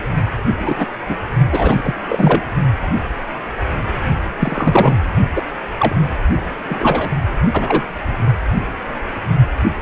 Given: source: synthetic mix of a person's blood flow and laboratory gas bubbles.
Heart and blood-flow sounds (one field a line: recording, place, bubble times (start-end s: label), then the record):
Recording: Doppler ultrasound of blood flow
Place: precordium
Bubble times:
0.58-0.85 s: bubbles
1.09-1.16 s: bubbles
1.51-1.96 s: bubbles
2.08-2.44 s: bubbles
4.40-4.97 s: bubbles
5.35-5.42 s: bubbles
5.78-5.96 s: bubbles
6.56-7.10 s: bubbles
7.53-7.83 s: bubbles
From the record:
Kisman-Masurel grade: 233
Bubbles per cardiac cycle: several, 3 to 8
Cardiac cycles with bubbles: 50 to 99%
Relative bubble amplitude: loud (0.450 to 0.775)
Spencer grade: 3 (all of the cardiac periods contain showers or single bubble signals, but not dominating or overriding the cardiac motion signals)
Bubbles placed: only in the low amplitude regions of the cardiac cycle